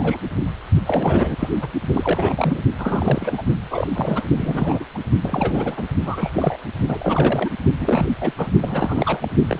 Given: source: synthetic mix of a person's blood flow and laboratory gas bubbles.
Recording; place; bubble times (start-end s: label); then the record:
Doppler ultrasound of blood flow; precordium
0.00-0.18 s: bubbles
0.86-1.35 s: bubbles
1.39-1.50 s: bubbles
1.61-1.68 s: bubbles
1.93-2.62 s: bubbles
2.79-3.43 s: bubbles
3.71-3.87 s: bubbles
3.93-4.23 s: bubbles
4.37-4.85 s: bubbles
4.94-4.98 s: bubbles
5.20-5.84 s: bubbles
6.05-6.31 s: bubbles
6.34-6.58 s: bubbles
6.88-7.49 s: bubbles
7.78-8.07 s: bubbles
8.21-8.33 s: bubbles
8.38-8.50 s: bubbles
8.61-9.28 s: bubbles
9.47-9.60 s: bubbles
From the record:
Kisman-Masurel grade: 342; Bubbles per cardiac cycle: rolling drumbeat, 9 or more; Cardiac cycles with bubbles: 100%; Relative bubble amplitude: moderate (0.250 to 0.450); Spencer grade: 3 (all of the cardiac periods contain showers or single bubble signals, but not dominating or overriding the cardiac motion signals); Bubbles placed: only in the low amplitude regions of the cardiac cycle